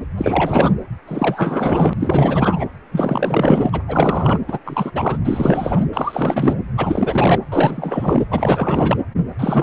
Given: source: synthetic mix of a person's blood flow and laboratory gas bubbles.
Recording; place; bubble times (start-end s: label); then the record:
Doppler ultrasound of blood flow; precordium
0.17-0.73 s: bubbles
1.07-1.93 s: bubbles
1.99-2.66 s: bubbles
2.91-3.69 s: bubbles
3.72-3.83 s: bubbles
3.87-4.39 s: bubbles
4.48-4.59 s: bubbles
4.65-4.91 s: bubbles
4.94-5.18 s: bubbles
5.25-5.86 s: bubbles
5.93-6.60 s: bubbles
6.77-7.39 s: bubbles
7.50-8.25 s: bubbles
8.30-8.97 s: bubbles
9.39-9.63 s: bubbles
From the record:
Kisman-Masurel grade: 444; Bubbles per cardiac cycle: continuous sound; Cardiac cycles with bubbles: 100%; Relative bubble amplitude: maximal (0.775 to 0.999); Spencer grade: 4 (maximum detectable bubble signal sounding continuously throughout systole and diastole of every cardiac period, and overriding the amplitude of the normal cardiac signals); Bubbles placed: anywhere in the cardiac cycle